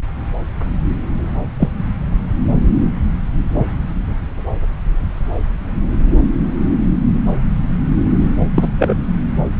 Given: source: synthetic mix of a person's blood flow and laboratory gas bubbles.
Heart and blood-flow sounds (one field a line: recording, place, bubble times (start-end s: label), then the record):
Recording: Doppler ultrasound of blood flow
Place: subclavian vein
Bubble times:
1.60-1.69 s: bubbles
8.55-8.68 s: bubbles
8.78-8.94 s: bubbles
From the record:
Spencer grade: 2 (many but less than half of the cardiac periods contain bubble signals, singularly or in groups)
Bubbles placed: anywhere in the cardiac cycle